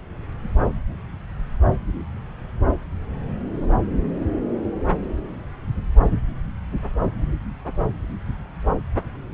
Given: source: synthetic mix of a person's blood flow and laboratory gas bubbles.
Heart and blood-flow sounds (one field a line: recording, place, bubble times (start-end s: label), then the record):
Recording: Doppler ultrasound of blood flow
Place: subclavian vein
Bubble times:
no bubbles
From the record:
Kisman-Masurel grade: 000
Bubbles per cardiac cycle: 0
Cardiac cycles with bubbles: 0%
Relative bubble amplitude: no bubbles discernible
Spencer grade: 0 (complete lack of bubble signals)